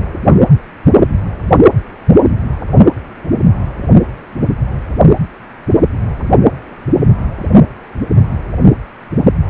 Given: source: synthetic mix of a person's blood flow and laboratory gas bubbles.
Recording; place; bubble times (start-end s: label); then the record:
Doppler ultrasound of blood flow; precordium
0.53-0.58 s: bubbles
From the record:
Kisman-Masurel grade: 111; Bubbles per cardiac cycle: 1 to 2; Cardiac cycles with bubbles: 1 to 10%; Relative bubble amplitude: barely perceptible (0.100 to 0.250); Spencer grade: 1 (occasional bubble signal discernible with the cardiac motion signal, with majority of cardiac periods free of bubbles); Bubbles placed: only in the low amplitude regions of the cardiac cycle